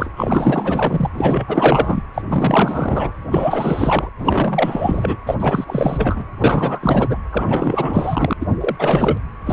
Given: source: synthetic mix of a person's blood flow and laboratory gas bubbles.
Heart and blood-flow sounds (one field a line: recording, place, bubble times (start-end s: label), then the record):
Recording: Doppler ultrasound of blood flow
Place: precordium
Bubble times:
0.00-0.10 s: bubbles
0.16-1.10 s: bubbles
1.12-2.03 s: bubbles
2.14-2.22 s: bubbles
2.29-3.13 s: bubbles
3.25-4.09 s: bubbles
4.18-5.17 s: bubbles
5.26-5.35 s: bubbles
5.39-6.22 s: bubbles
6.38-7.18 s: bubbles
7.31-8.33 s: bubbles
8.40-8.56 s: bubbles
8.60-8.76 s: bubbles
8.79-9.18 s: bubbles
9.46-9.53 s: bubbles
From the record:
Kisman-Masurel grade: 444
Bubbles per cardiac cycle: continuous sound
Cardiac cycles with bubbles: 100%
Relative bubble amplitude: maximal (0.775 to 0.999)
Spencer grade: 4 (maximum detectable bubble signal sounding continuously throughout systole and diastole of every cardiac period, and overriding the amplitude of the normal cardiac signals)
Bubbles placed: anywhere in the cardiac cycle